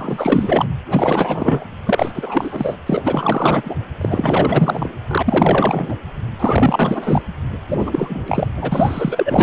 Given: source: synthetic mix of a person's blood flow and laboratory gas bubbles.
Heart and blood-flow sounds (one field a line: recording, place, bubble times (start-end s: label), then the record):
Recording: Doppler ultrasound of blood flow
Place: precordium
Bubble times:
0.00-0.66 s: bubbles
0.91-1.73 s: bubbles
1.86-2.77 s: bubbles
2.86-3.75 s: bubbles
4.01-4.88 s: bubbles
5.08-5.95 s: bubbles
6.39-7.21 s: bubbles
7.69-8.21 s: bubbles
8.27-8.47 s: bubbles
8.56-9.43 s: bubbles
From the record:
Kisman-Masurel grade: 444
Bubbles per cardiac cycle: continuous sound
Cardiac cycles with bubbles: 100%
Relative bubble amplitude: maximal (0.775 to 0.999)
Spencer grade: 4 (maximum detectable bubble signal sounding continuously throughout systole and diastole of every cardiac period, and overriding the amplitude of the normal cardiac signals)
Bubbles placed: anywhere in the cardiac cycle